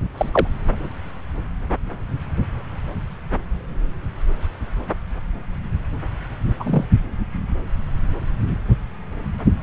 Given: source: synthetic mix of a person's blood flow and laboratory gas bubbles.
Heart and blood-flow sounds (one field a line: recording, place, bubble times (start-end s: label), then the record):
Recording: Doppler ultrasound of blood flow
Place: subclavian vein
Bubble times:
0.17-0.47 s: bubbles
6.59-6.84 s: bubbles
From the record:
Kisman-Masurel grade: 123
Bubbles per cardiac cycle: 1 to 2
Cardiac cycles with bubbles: 10 to 50%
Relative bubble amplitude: loud (0.450 to 0.775)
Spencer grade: 2 (many but less than half of the cardiac periods contain bubble signals, singularly or in groups)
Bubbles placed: anywhere in the cardiac cycle